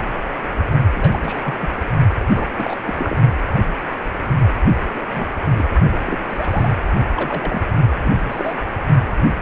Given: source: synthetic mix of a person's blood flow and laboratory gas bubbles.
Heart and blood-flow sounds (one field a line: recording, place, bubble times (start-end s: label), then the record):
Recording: Doppler ultrasound of blood flow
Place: precordium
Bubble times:
0.95-1.19 s: bubbles
1.22-1.54 s: bubbles
1.61-1.68 s: bubbles
2.29-2.46 s: bubbles
2.58-2.75 s: bubbles
2.85-3.16 s: bubbles
4.94-5.04 s: bubbles
5.13-5.25 s: bubbles
5.50-5.68 s: bubbles
5.92-5.98 s: bubbles
6.04-6.18 s: bubbles
6.29-6.77 s: bubbles
7.17-7.61 s: bubbles
8.04-8.12 s: bubbles
8.24-8.56 s: bubbles
From the record:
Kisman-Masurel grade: 232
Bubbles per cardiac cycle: several, 3 to 8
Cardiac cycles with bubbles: 50 to 99%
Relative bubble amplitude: moderate (0.250 to 0.450)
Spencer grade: 3 (all of the cardiac periods contain showers or single bubble signals, but not dominating or overriding the cardiac motion signals)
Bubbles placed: only in the low amplitude regions of the cardiac cycle